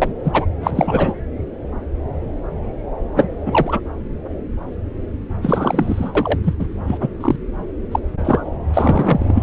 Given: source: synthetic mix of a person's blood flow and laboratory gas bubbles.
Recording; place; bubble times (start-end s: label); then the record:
Doppler ultrasound of blood flow; subclavian vein
0.02-0.13 s: bubbles
0.24-0.46 s: bubbles
0.60-1.15 s: bubbles
3.17-3.28 s: bubbles
3.46-3.80 s: bubbles
5.42-6.12 s: bubbles
6.15-6.39 s: bubbles
6.43-6.54 s: bubbles
6.59-6.67 s: bubbles
6.87-6.97 s: bubbles
7.00-7.08 s: bubbles
7.20-7.36 s: bubbles
7.91-7.99 s: bubbles
8.24-8.44 s: bubbles
8.73-9.43 s: bubbles
From the record:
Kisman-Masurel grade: 233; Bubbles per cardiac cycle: several, 3 to 8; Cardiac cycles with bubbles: 50 to 99%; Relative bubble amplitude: loud (0.450 to 0.775); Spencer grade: 3 (all of the cardiac periods contain showers or single bubble signals, but not dominating or overriding the cardiac motion signals); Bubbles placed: anywhere in the cardiac cycle